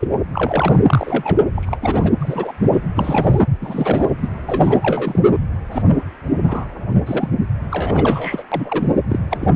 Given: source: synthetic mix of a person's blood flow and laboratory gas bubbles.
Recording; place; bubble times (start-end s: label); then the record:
Doppler ultrasound of blood flow; precordium
0.00-0.08 s: bubbles
0.33-0.78 s: bubbles
0.86-1.42 s: bubbles
1.55-1.77 s: bubbles
1.81-2.11 s: bubbles
2.20-2.54 s: bubbles
2.58-2.69 s: bubbles
2.73-2.81 s: bubbles
2.96-3.40 s: bubbles
3.62-4.06 s: bubbles
4.21-4.28 s: bubbles
4.46-5.19 s: bubbles
5.71-5.82 s: bubbles
6.43-6.65 s: bubbles
7.06-7.29 s: bubbles
7.71-8.43 s: bubbles
8.51-8.88 s: bubbles
9.08-9.20 s: bubbles
9.30-9.38 s: bubbles
9.41-9.48 s: bubbles
From the record:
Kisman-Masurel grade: 242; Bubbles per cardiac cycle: several, 3 to 8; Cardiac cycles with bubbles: 100%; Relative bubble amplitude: moderate (0.250 to 0.450); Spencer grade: 3 (all of the cardiac periods contain showers or single bubble signals, but not dominating or overriding the cardiac motion signals); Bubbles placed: anywhere in the cardiac cycle